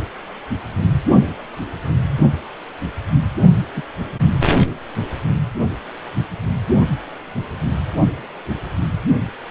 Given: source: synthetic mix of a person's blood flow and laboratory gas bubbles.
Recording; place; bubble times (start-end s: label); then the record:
Doppler ultrasound of blood flow; precordium
3.76-3.82 s: bubbles
From the record:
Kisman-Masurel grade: 112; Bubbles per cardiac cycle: 1 to 2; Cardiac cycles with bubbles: 1 to 10%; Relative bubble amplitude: moderate (0.250 to 0.450); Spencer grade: 1 (occasional bubble signal discernible with the cardiac motion signal, with majority of cardiac periods free of bubbles); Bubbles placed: only in the low amplitude regions of the cardiac cycle